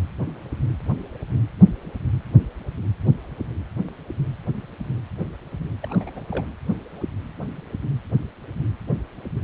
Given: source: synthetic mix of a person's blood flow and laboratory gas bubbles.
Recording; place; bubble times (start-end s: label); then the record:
Doppler ultrasound of blood flow; precordium
5.83-6.21 s: bubbles
6.31-6.46 s: bubbles
From the record:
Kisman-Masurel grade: 211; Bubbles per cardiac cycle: several, 3 to 8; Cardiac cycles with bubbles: 1 to 10%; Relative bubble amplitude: barely perceptible (0.100 to 0.250); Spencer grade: 1 (occasional bubble signal discernible with the cardiac motion signal, with majority of cardiac periods free of bubbles); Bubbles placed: anywhere in the cardiac cycle